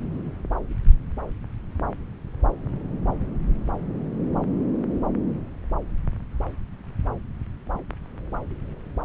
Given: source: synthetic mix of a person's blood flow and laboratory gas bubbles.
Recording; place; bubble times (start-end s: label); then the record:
Doppler ultrasound of blood flow; subclavian vein
no bubbles
From the record:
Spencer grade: 0 (complete lack of bubble signals)